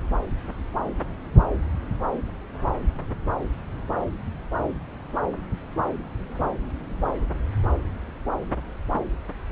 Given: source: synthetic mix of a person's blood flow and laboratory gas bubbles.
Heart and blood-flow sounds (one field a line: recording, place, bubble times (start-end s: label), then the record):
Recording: Doppler ultrasound of blood flow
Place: subclavian vein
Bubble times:
no bubbles
From the record:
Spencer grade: 0 (complete lack of bubble signals)